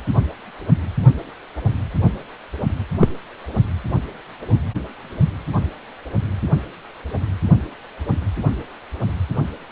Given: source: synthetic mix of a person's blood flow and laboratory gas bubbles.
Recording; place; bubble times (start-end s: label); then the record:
Doppler ultrasound of blood flow; precordium
3.00-3.09 s: bubbles
From the record:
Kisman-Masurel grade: 113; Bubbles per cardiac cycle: 1 to 2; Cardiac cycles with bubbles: 1 to 10%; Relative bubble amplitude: loud (0.450 to 0.775); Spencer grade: 1 (occasional bubble signal discernible with the cardiac motion signal, with majority of cardiac periods free of bubbles); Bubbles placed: only in the low amplitude regions of the cardiac cycle